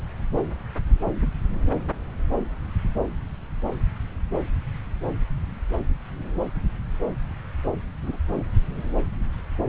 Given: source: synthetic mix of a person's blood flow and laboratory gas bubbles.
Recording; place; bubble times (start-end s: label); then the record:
Doppler ultrasound of blood flow; subclavian vein
1.22-1.30 s: bubbles
2.29-2.38 s: bubbles
8.03-8.17 s: bubbles
8.36-8.44 s: bubbles
From the record:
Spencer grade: 2 (many but less than half of the cardiac periods contain bubble signals, singularly or in groups); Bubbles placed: anywhere in the cardiac cycle